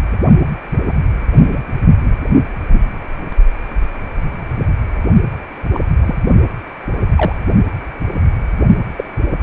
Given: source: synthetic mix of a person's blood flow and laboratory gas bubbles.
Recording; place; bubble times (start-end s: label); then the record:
Doppler ultrasound of blood flow; precordium
0.88-0.93 s: bubbles
1.43-1.63 s: bubbles
5.74-5.79 s: bubbles
6.00-6.15 s: bubbles
7.04-7.38 s: bubbles
8.96-9.04 s: bubbles
From the record:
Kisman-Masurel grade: 122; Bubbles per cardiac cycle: 1 to 2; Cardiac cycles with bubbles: 10 to 50%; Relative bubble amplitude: moderate (0.250 to 0.450); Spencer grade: 2 (many but less than half of the cardiac periods contain bubble signals, singularly or in groups); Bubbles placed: only in the low amplitude regions of the cardiac cycle